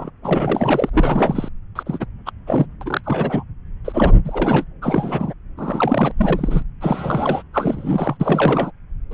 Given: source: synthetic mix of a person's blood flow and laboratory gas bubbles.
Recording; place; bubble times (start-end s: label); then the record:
Doppler ultrasound of blood flow; subclavian vein
0.00-0.10 s: bubbles
0.23-0.90 s: bubbles
0.93-1.49 s: bubbles
1.75-1.83 s: bubbles
1.86-2.05 s: bubbles
2.25-2.31 s: bubbles
2.46-2.66 s: bubbles
2.81-3.01 s: bubbles
3.04-3.44 s: bubbles
3.84-4.14 s: bubbles
4.25-4.64 s: bubbles
4.81-5.33 s: bubbles
5.58-6.12 s: bubbles
6.17-6.62 s: bubbles
6.80-7.42 s: bubbles
7.53-8.17 s: bubbles
8.20-8.71 s: bubbles
9.11-9.14 s: bubbles
From the record:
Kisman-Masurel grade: 342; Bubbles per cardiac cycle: rolling drumbeat, 9 or more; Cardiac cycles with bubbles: 100%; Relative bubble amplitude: moderate (0.250 to 0.450); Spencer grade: 3 (all of the cardiac periods contain showers or single bubble signals, but not dominating or overriding the cardiac motion signals); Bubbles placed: anywhere in the cardiac cycle